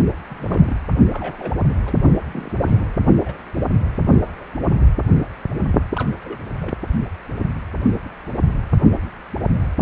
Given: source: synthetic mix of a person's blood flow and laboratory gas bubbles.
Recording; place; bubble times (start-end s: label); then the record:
Doppler ultrasound of blood flow; precordium
0.30-0.77 s: bubbles
1.12-1.62 s: bubbles
1.85-1.95 s: bubbles
1.98-2.12 s: bubbles
2.31-2.93 s: bubbles
3.13-3.19 s: bubbles
3.22-3.33 s: bubbles
3.54-3.62 s: bubbles
5.96-6.10 s: bubbles
6.24-6.40 s: bubbles
6.59-6.75 s: bubbles
From the record:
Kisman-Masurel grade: 221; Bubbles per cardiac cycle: several, 3 to 8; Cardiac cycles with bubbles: 10 to 50%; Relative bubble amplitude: barely perceptible (0.100 to 0.250); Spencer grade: 2 (many but less than half of the cardiac periods contain bubble signals, singularly or in groups); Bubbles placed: anywhere in the cardiac cycle